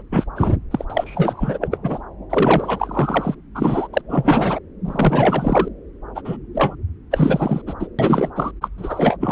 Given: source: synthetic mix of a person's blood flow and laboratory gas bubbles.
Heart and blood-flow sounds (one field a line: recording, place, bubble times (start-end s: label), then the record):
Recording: Doppler ultrasound of blood flow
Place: subclavian vein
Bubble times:
0.00-0.02 s: bubbles
0.11-0.25 s: bubbles
0.35-0.54 s: bubbles
0.71-0.85 s: bubbles
0.90-1.58 s: bubbles
1.61-1.68 s: bubbles
1.71-1.78 s: bubbles
1.82-2.01 s: bubbles
2.29-3.35 s: bubbles
3.54-3.88 s: bubbles
3.93-4.01 s: bubbles
4.08-4.58 s: bubbles
4.84-5.68 s: bubbles
6.15-6.21 s: bubbles
6.25-6.37 s: bubbles
6.54-6.75 s: bubbles
7.11-7.62 s: bubbles
7.66-7.73 s: bubbles
7.79-7.87 s: bubbles
7.98-8.30 s: bubbles
8.36-8.51 s: bubbles
8.61-8.69 s: bubbles
8.78-9.17 s: bubbles
9.20-9.32 s: bubbles
From the record:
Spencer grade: 4 (maximum detectable bubble signal sounding continuously throughout systole and diastole of every cardiac period, and overriding the amplitude of the normal cardiac signals)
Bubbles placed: anywhere in the cardiac cycle